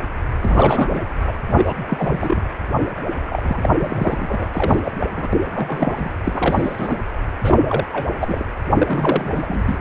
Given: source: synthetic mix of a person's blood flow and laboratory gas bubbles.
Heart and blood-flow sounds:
Doppler ultrasound of blood flow; precordium
0.40-1.01 s: bubbles
1.26-1.33 s: bubbles
1.48-1.73 s: bubbles
1.90-2.41 s: bubbles
3.25-3.69 s: bubbles
3.80-4.48 s: bubbles
4.53-4.79 s: bubbles
4.83-4.92 s: bubbles
4.99-5.07 s: bubbles
5.16-5.28 s: bubbles
5.54-6.12 s: bubbles
6.24-6.99 s: bubbles
7.43-7.88 s: bubbles
7.92-8.10 s: bubbles
8.20-8.45 s: bubbles
8.78-9.78 s: bubbles
From the record:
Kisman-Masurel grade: 342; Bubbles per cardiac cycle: rolling drumbeat, 9 or more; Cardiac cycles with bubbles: 100%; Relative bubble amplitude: moderate (0.250 to 0.450); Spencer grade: 3 (all of the cardiac periods contain showers or single bubble signals, but not dominating or overriding the cardiac motion signals); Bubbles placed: anywhere in the cardiac cycle

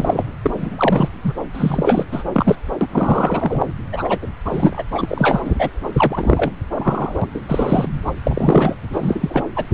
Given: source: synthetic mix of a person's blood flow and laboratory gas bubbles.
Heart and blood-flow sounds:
Doppler ultrasound of blood flow; subclavian vein
0.00-0.24 s: bubbles
0.44-0.51 s: bubbles
0.54-1.08 s: bubbles
1.24-1.33 s: bubbles
1.54-2.04 s: bubbles
2.12-2.23 s: bubbles
2.32-2.56 s: bubbles
2.81-2.87 s: bubbles
2.92-3.73 s: bubbles
3.92-4.19 s: bubbles
4.22-4.27 s: bubbles
4.45-4.83 s: bubbles
4.92-5.41 s: bubbles
5.45-5.55 s: bubbles
5.58-5.70 s: bubbles
5.92-6.51 s: bubbles
6.75-7.26 s: bubbles
7.34-7.41 s: bubbles
7.47-7.89 s: bubbles
8.06-8.12 s: bubbles
8.23-8.75 s: bubbles
8.92-9.42 s: bubbles
9.55-9.64 s: bubbles
From the record:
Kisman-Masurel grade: 343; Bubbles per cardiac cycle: rolling drumbeat, 9 or more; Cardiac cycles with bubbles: 100%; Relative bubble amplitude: loud (0.450 to 0.775); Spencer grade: 3 (all of the cardiac periods contain showers or single bubble signals, but not dominating or overriding the cardiac motion signals); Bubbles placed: anywhere in the cardiac cycle

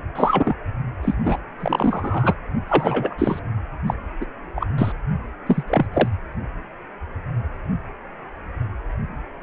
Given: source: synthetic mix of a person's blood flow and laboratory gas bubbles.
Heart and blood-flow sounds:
Doppler ultrasound of blood flow; precordium
0.15-0.55 s: bubbles
1.02-1.15 s: bubbles
1.23-1.38 s: bubbles
1.60-2.33 s: bubbles
2.67-3.15 s: bubbles
3.18-3.40 s: bubbles
3.86-3.94 s: bubbles
4.21-4.25 s: bubbles
4.55-4.67 s: bubbles
4.78-4.92 s: bubbles
5.46-5.63 s: bubbles
5.67-5.86 s: bubbles
5.93-6.08 s: bubbles
From the record:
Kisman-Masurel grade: 233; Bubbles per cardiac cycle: several, 3 to 8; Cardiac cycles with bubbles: 50 to 99%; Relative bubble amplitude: loud (0.450 to 0.775); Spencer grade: 3 (all of the cardiac periods contain showers or single bubble signals, but not dominating or overriding the cardiac motion signals); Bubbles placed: anywhere in the cardiac cycle

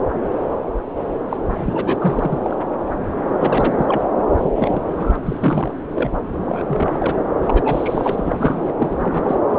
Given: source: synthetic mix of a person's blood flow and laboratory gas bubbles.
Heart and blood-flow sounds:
Doppler ultrasound of blood flow; subclavian vein
1.29-1.37 s: bubbles
1.44-2.40 s: bubbles
2.44-2.56 s: bubbles
3.40-4.04 s: bubbles
4.37-4.51 s: bubbles
4.55-5.16 s: bubbles
5.25-5.71 s: bubbles
5.95-6.10 s: bubbles
6.41-6.62 s: bubbles
6.67-7.25 s: bubbles
7.42-8.73 s: bubbles
8.79-9.37 s: bubbles
9.50-9.59 s: bubbles
From the record:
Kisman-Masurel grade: 232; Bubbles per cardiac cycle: several, 3 to 8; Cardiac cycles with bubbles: 50 to 99%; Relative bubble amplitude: moderate (0.250 to 0.450); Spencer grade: 3 (all of the cardiac periods contain showers or single bubble signals, but not dominating or overriding the cardiac motion signals); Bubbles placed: anywhere in the cardiac cycle

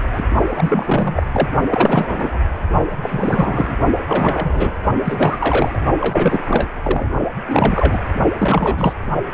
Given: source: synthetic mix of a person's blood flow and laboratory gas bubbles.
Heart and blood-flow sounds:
Doppler ultrasound of blood flow; precordium
0.00-0.02 s: bubbles
0.12-0.22 s: bubbles
0.48-1.24 s: bubbles
1.32-1.50 s: bubbles
1.70-2.40 s: bubbles
3.01-3.77 s: bubbles
4.06-4.72 s: bubbles
5.04-5.82 s: bubbles
6.01-6.43 s: bubbles
6.47-6.69 s: bubbles
6.82-7.10 s: bubbles
7.48-8.01 s: bubbles
8.39-8.93 s: bubbles
9.32-9.34 s: bubbles
From the record:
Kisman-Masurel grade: 343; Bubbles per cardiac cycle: rolling drumbeat, 9 or more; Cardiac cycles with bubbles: 100%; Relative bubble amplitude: loud (0.450 to 0.775); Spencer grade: 3 (all of the cardiac periods contain showers or single bubble signals, but not dominating or overriding the cardiac motion signals); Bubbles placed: only in the low amplitude regions of the cardiac cycle

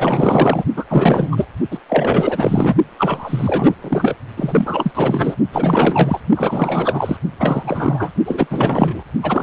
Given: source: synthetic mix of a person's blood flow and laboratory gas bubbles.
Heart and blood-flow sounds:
Doppler ultrasound of blood flow; precordium
0.00-0.65 s: bubbles
0.76-0.84 s: bubbles
0.90-1.45 s: bubbles
1.71-1.79 s: bubbles
1.89-2.75 s: bubbles
2.98-3.74 s: bubbles
3.80-4.15 s: bubbles
4.37-4.92 s: bubbles
4.95-5.37 s: bubbles
5.51-6.20 s: bubbles
6.35-7.17 s: bubbles
7.38-8.10 s: bubbles
8.25-8.47 s: bubbles
8.50-9.03 s: bubbles
9.22-9.43 s: bubbles
From the record:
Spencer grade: 4 (maximum detectable bubble signal sounding continuously throughout systole and diastole of every cardiac period, and overriding the amplitude of the normal cardiac signals); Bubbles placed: only in the low amplitude regions of the cardiac cycle

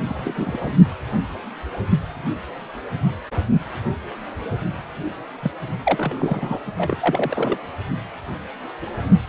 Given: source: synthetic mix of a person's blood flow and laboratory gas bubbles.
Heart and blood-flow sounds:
Doppler ultrasound of blood flow; precordium
0.08-0.33 s: bubbles
0.35-0.77 s: bubbles
5.42-5.51 s: bubbles
5.85-6.59 s: bubbles
6.77-7.57 s: bubbles
From the record:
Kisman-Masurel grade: 222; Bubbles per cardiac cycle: several, 3 to 8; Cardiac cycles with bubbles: 10 to 50%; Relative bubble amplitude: moderate (0.250 to 0.450); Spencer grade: 2 (many but less than half of the cardiac periods contain bubble signals, singularly or in groups); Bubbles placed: only in the low amplitude regions of the cardiac cycle

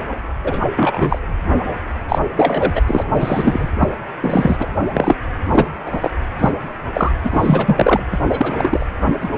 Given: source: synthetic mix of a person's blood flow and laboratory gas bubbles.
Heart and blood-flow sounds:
Doppler ultrasound of blood flow; precordium
0.44-0.60 s: bubbles
0.76-1.19 s: bubbles
2.08-2.19 s: bubbles
2.36-2.72 s: bubbles
2.74-2.82 s: bubbles
2.86-3.04 s: bubbles
3.17-3.67 s: bubbles
3.80-3.89 s: bubbles
4.22-4.57 s: bubbles
4.59-4.67 s: bubbles
4.94-5.16 s: bubbles
5.52-5.68 s: bubbles
5.86-6.12 s: bubbles
6.39-6.50 s: bubbles
6.93-7.14 s: bubbles
7.24-8.00 s: bubbles
8.12-8.20 s: bubbles
8.29-8.87 s: bubbles
9.06-9.14 s: bubbles
9.21-9.29 s: bubbles
From the record:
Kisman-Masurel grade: 243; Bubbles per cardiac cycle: several, 3 to 8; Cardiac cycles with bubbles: 100%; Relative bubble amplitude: loud (0.450 to 0.775); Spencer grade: 3 (all of the cardiac periods contain showers or single bubble signals, but not dominating or overriding the cardiac motion signals); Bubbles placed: anywhere in the cardiac cycle

